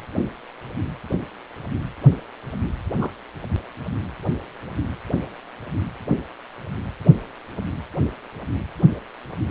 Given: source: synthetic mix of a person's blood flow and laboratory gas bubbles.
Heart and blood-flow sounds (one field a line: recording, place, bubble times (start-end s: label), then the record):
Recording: Doppler ultrasound of blood flow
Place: precordium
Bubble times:
2.97-3.10 s: bubbles
From the record:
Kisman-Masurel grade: 111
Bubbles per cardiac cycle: 1 to 2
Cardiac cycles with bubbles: 1 to 10%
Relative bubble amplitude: barely perceptible (0.100 to 0.250)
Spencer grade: 1 (occasional bubble signal discernible with the cardiac motion signal, with majority of cardiac periods free of bubbles)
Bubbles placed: anywhere in the cardiac cycle